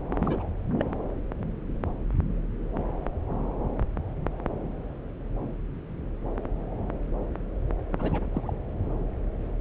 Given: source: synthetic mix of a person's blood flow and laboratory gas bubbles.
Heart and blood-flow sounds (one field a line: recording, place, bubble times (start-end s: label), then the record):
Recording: Doppler ultrasound of blood flow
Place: subclavian vein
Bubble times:
0.10-0.47 s: bubbles
0.79-0.91 s: bubbles
7.93-8.27 s: bubbles
8.32-8.54 s: bubbles
8.82-8.89 s: bubbles
From the record:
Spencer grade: 2 (many but less than half of the cardiac periods contain bubble signals, singularly or in groups)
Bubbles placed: anywhere in the cardiac cycle